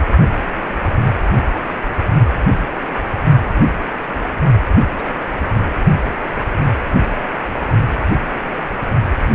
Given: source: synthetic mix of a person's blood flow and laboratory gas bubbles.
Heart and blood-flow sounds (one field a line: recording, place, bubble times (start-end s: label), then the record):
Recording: Doppler ultrasound of blood flow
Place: precordium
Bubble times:
4.96-5.12 s: bubbles
5.49-5.53 s: bubbles
From the record:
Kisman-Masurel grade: 111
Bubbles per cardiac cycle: 1 to 2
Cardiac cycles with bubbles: 1 to 10%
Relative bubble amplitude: barely perceptible (0.100 to 0.250)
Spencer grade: 1 (occasional bubble signal discernible with the cardiac motion signal, with majority of cardiac periods free of bubbles)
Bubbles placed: only in the low amplitude regions of the cardiac cycle